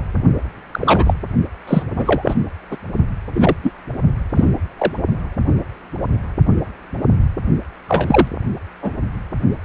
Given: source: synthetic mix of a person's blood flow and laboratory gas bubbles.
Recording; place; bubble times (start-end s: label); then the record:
Doppler ultrasound of blood flow; precordium
0.00-0.03 s: bubbles
0.71-1.14 s: bubbles
1.67-1.83 s: bubbles
1.96-2.35 s: bubbles
2.71-2.77 s: bubbles
3.33-3.56 s: bubbles
3.62-3.73 s: bubbles
4.35-4.52 s: bubbles
4.78-4.92 s: bubbles
7.88-8.28 s: bubbles
8.82-8.92 s: bubbles
From the record:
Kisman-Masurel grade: 233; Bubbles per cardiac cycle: several, 3 to 8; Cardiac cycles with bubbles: 50 to 99%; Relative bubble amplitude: loud (0.450 to 0.775); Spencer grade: 3 (all of the cardiac periods contain showers or single bubble signals, but not dominating or overriding the cardiac motion signals); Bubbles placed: only in the low amplitude regions of the cardiac cycle